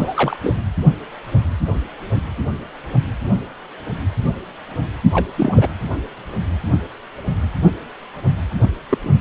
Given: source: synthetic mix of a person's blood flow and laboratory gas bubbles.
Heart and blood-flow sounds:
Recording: Doppler ultrasound of blood flow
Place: precordium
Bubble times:
0.00-0.37 s: bubbles
0.42-0.56 s: bubbles
5.13-5.25 s: bubbles
5.36-5.70 s: bubbles
8.60-8.67 s: bubbles
8.89-8.98 s: bubbles
9.03-9.11 s: bubbles
From the record:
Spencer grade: 2 (many but less than half of the cardiac periods contain bubble signals, singularly or in groups)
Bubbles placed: anywhere in the cardiac cycle

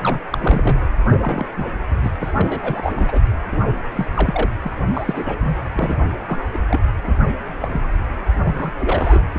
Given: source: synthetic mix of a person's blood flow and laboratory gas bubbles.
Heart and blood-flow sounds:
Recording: Doppler ultrasound of blood flow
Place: precordium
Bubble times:
0.01-0.19 s: bubbles
0.31-0.80 s: bubbles
1.10-1.46 s: bubbles
1.56-1.65 s: bubbles
2.02-2.12 s: bubbles
2.19-2.32 s: bubbles
2.35-2.93 s: bubbles
2.96-3.21 s: bubbles
3.52-3.57 s: bubbles
3.96-4.09 s: bubbles
4.15-4.50 s: bubbles
4.63-4.74 s: bubbles
4.95-5.38 s: bubbles
5.40-5.55 s: bubbles
5.74-5.96 s: bubbles
6.26-6.39 s: bubbles
6.53-6.58 s: bubbles
6.67-6.80 s: bubbles
7.03-7.17 s: bubbles
7.59-7.81 s: bubbles
8.44-8.73 s: bubbles
8.79-9.21 s: bubbles
9.34-9.38 s: bubbles
From the record:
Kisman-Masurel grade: 242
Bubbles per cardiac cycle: several, 3 to 8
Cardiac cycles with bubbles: 100%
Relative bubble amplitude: moderate (0.250 to 0.450)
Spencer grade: 3 (all of the cardiac periods contain showers or single bubble signals, but not dominating or overriding the cardiac motion signals)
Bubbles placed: anywhere in the cardiac cycle

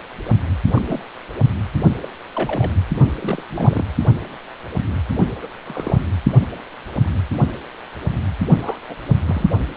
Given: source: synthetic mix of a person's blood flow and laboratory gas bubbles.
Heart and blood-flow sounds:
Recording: Doppler ultrasound of blood flow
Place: precordium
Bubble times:
0.75-1.00 s: bubbles
2.02-2.08 s: bubbles
2.35-2.72 s: bubbles
3.05-3.15 s: bubbles
3.20-3.43 s: bubbles
3.49-3.85 s: bubbles
5.15-5.24 s: bubbles
5.42-5.48 s: bubbles
5.66-6.00 s: bubbles
8.55-8.78 s: bubbles
8.89-8.96 s: bubbles
9.26-9.47 s: bubbles
From the record:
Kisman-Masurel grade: 221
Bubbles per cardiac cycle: several, 3 to 8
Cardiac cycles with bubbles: 10 to 50%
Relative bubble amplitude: barely perceptible (0.100 to 0.250)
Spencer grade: 2 (many but less than half of the cardiac periods contain bubble signals, singularly or in groups)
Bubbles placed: anywhere in the cardiac cycle

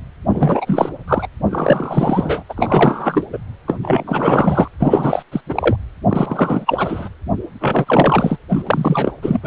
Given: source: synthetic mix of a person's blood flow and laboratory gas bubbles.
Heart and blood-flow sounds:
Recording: Doppler ultrasound of blood flow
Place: precordium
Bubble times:
0.27-0.90 s: bubbles
1.07-1.28 s: bubbles
1.46-2.43 s: bubbles
2.49-2.54 s: bubbles
2.56-3.25 s: bubbles
3.33-3.39 s: bubbles
3.67-3.78 s: bubbles
3.82-4.68 s: bubbles
4.79-5.22 s: bubbles
5.32-5.41 s: bubbles
5.49-5.76 s: bubbles
6.08-7.09 s: bubbles
7.60-8.37 s: bubbles
8.48-8.63 s: bubbles
8.66-9.13 s: bubbles
9.22-9.39 s: bubbles
9.42-9.47 s: bubbles
From the record:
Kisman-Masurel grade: 343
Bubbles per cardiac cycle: rolling drumbeat, 9 or more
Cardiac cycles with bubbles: 100%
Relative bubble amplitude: loud (0.450 to 0.775)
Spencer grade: 3 (all of the cardiac periods contain showers or single bubble signals, but not dominating or overriding the cardiac motion signals)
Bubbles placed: anywhere in the cardiac cycle

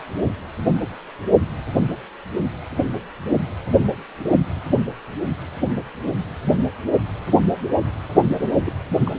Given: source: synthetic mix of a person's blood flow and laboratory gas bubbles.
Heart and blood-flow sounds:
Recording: Doppler ultrasound of blood flow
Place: precordium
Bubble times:
8.65-8.72 s: bubbles
8.88-9.15 s: bubbles
From the record:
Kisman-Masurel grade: 211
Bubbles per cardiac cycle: several, 3 to 8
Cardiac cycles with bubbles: 1 to 10%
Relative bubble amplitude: barely perceptible (0.100 to 0.250)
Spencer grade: 1 (occasional bubble signal discernible with the cardiac motion signal, with majority of cardiac periods free of bubbles)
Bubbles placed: anywhere in the cardiac cycle

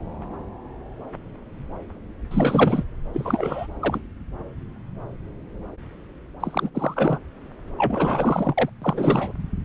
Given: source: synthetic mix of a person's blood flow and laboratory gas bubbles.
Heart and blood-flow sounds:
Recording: Doppler ultrasound of blood flow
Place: subclavian vein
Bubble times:
2.31-2.83 s: bubbles
3.12-3.67 s: bubbles
3.80-4.00 s: bubbles
6.40-6.69 s: bubbles
6.75-7.19 s: bubbles
7.78-8.54 s: bubbles
8.57-8.70 s: bubbles
8.81-9.32 s: bubbles
From the record:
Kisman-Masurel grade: 332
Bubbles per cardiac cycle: rolling drumbeat, 9 or more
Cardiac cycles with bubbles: 50 to 99%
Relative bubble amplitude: moderate (0.250 to 0.450)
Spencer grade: 3 (all of the cardiac periods contain showers or single bubble signals, but not dominating or overriding the cardiac motion signals)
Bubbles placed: anywhere in the cardiac cycle

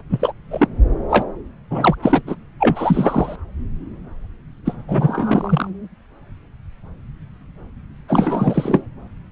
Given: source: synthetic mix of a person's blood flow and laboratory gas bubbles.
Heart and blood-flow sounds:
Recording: Doppler ultrasound of blood flow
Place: subclavian vein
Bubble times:
0.10-0.33 s: bubbles
0.51-0.67 s: bubbles
1.09-1.26 s: bubbles
1.71-1.95 s: bubbles
2.02-2.22 s: bubbles
2.27-2.35 s: bubbles
2.59-3.36 s: bubbles
4.65-4.76 s: bubbles
4.88-5.70 s: bubbles
8.08-8.88 s: bubbles
From the record:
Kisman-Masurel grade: 233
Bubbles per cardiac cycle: several, 3 to 8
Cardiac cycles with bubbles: 50 to 99%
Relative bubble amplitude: loud (0.450 to 0.775)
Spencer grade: 3 (all of the cardiac periods contain showers or single bubble signals, but not dominating or overriding the cardiac motion signals)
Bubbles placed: anywhere in the cardiac cycle

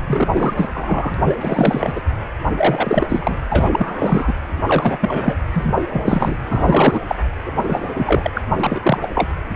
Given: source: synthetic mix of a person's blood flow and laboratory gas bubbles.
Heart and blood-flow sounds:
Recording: Doppler ultrasound of blood flow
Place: precordium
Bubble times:
0.07-0.28 s: bubbles
0.34-0.54 s: bubbles
0.56-0.68 s: bubbles
0.72-1.15 s: bubbles
1.17-2.02 s: bubbles
2.56-3.35 s: bubbles
3.48-4.33 s: bubbles
4.66-5.37 s: bubbles
5.54-5.82 s: bubbles
5.90-6.38 s: bubbles
6.49-7.01 s: bubbles
7.07-7.18 s: bubbles
7.46-7.52 s: bubbles
7.60-8.31 s: bubbles
8.35-8.42 s: bubbles
8.58-8.98 s: bubbles
9.02-9.09 s: bubbles
9.15-9.30 s: bubbles
From the record:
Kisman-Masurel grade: 343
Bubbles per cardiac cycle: rolling drumbeat, 9 or more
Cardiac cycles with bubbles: 100%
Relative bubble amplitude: loud (0.450 to 0.775)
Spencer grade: 3 (all of the cardiac periods contain showers or single bubble signals, but not dominating or overriding the cardiac motion signals)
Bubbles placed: anywhere in the cardiac cycle

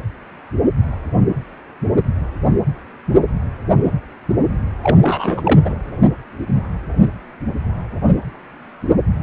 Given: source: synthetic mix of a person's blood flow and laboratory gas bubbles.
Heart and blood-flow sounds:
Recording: Doppler ultrasound of blood flow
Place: precordium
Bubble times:
4.83-4.97 s: bubbles
5.02-5.42 s: bubbles
5.44-5.60 s: bubbles
5.65-5.75 s: bubbles
From the record:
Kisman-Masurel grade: 213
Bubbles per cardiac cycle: several, 3 to 8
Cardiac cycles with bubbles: 1 to 10%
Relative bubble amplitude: loud (0.450 to 0.775)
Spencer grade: 1 (occasional bubble signal discernible with the cardiac motion signal, with majority of cardiac periods free of bubbles)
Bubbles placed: anywhere in the cardiac cycle

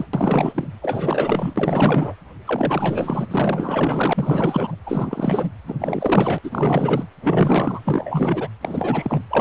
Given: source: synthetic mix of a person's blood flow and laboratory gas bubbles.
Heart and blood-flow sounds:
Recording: Doppler ultrasound of blood flow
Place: precordium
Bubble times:
0.00-0.06 s: bubbles
0.13-0.68 s: bubbles
0.81-1.53 s: bubbles
1.56-2.15 s: bubbles
2.46-3.27 s: bubbles
3.31-4.76 s: bubbles
4.86-5.51 s: bubbles
5.66-6.38 s: bubbles
6.44-7.07 s: bubbles
7.22-7.82 s: bubbles
7.84-8.49 s: bubbles
8.61-9.24 s: bubbles
9.30-9.41 s: bubbles
From the record:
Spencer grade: 4 (maximum detectable bubble signal sounding continuously throughout systole and diastole of every cardiac period, and overriding the amplitude of the normal cardiac signals)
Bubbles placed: anywhere in the cardiac cycle

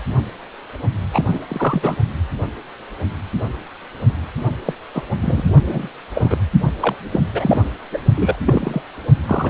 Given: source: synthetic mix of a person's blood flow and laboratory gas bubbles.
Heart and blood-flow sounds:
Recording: Doppler ultrasound of blood flow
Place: precordium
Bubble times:
1.12-1.39 s: bubbles
1.48-1.96 s: bubbles
4.65-4.74 s: bubbles
4.93-5.04 s: bubbles
5.21-5.52 s: bubbles
5.67-5.89 s: bubbles
6.14-6.38 s: bubbles
6.80-6.96 s: bubbles
7.12-7.25 s: bubbles
7.33-7.62 s: bubbles
7.92-8.00 s: bubbles
8.16-8.37 s: bubbles
8.46-8.82 s: bubbles
9.26-9.49 s: bubbles
From the record:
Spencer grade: 3 (all of the cardiac periods contain showers or single bubble signals, but not dominating or overriding the cardiac motion signals)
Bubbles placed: only in the low amplitude regions of the cardiac cycle

